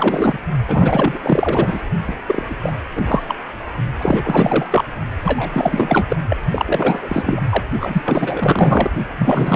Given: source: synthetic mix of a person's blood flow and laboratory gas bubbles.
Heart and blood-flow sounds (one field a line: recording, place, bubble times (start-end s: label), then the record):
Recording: Doppler ultrasound of blood flow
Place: precordium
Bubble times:
0.00-0.39 s: bubbles
0.66-1.18 s: bubbles
1.22-1.84 s: bubbles
2.07-2.14 s: bubbles
2.27-2.44 s: bubbles
2.49-2.54 s: bubbles
2.59-2.72 s: bubbles
2.96-3.23 s: bubbles
3.28-3.35 s: bubbles
4.01-4.66 s: bubbles
4.71-4.84 s: bubbles
5.24-6.17 s: bubbles
6.29-6.37 s: bubbles
6.50-7.46 s: bubbles
7.50-7.63 s: bubbles
7.79-8.02 s: bubbles
8.05-8.91 s: bubbles
9.18-9.56 s: bubbles
From the record:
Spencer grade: 4 (maximum detectable bubble signal sounding continuously throughout systole and diastole of every cardiac period, and overriding the amplitude of the normal cardiac signals)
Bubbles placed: only in the low amplitude regions of the cardiac cycle